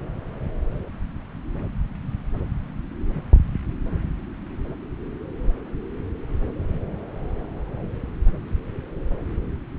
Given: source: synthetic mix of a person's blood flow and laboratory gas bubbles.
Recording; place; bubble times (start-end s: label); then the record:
Doppler ultrasound of blood flow; subclavian vein
no bubbles
From the record:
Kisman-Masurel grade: 000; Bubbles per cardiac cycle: 0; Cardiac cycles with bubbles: 0%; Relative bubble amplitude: no bubbles discernible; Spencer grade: 0 (complete lack of bubble signals)